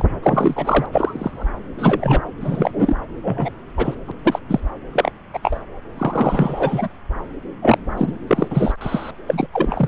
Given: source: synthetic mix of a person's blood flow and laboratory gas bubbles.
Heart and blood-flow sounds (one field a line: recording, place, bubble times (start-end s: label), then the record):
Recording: Doppler ultrasound of blood flow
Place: subclavian vein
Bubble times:
0.00-0.05 s: bubbles
0.23-0.86 s: bubbles
0.92-1.46 s: bubbles
1.78-2.22 s: bubbles
2.41-2.96 s: bubbles
3.23-3.51 s: bubbles
3.77-3.95 s: bubbles
4.07-4.12 s: bubbles
4.25-4.39 s: bubbles
4.49-4.60 s: bubbles
4.92-5.11 s: bubbles
5.33-5.39 s: bubbles
5.42-5.60 s: bubbles
5.98-6.88 s: bubbles
7.62-7.78 s: bubbles
7.97-8.17 s: bubbles
8.28-8.73 s: bubbles
8.81-9.11 s: bubbles
9.27-9.47 s: bubbles
9.53-9.88 s: bubbles
From the record:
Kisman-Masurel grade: 243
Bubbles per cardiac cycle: several, 3 to 8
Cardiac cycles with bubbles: 100%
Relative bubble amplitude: loud (0.450 to 0.775)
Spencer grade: 3 (all of the cardiac periods contain showers or single bubble signals, but not dominating or overriding the cardiac motion signals)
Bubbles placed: anywhere in the cardiac cycle